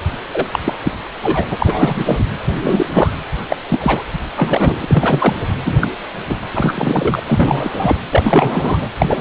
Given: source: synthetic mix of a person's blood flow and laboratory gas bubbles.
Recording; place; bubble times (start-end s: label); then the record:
Doppler ultrasound of blood flow; precordium
0.33-0.48 s: bubbles
0.52-0.59 s: bubbles
0.65-0.76 s: bubbles
0.84-0.91 s: bubbles
1.23-1.46 s: bubbles
1.50-2.25 s: bubbles
2.44-3.11 s: bubbles
3.48-3.56 s: bubbles
3.68-4.04 s: bubbles
4.37-5.35 s: bubbles
5.65-5.78 s: bubbles
5.81-5.88 s: bubbles
6.29-6.36 s: bubbles
6.54-7.21 s: bubbles
7.26-7.96 s: bubbles
8.08-8.89 s: bubbles
8.98-9.21 s: bubbles
From the record:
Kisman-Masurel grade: 243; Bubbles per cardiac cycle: several, 3 to 8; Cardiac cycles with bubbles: 100%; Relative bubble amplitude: loud (0.450 to 0.775); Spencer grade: 3 (all of the cardiac periods contain showers or single bubble signals, but not dominating or overriding the cardiac motion signals); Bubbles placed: anywhere in the cardiac cycle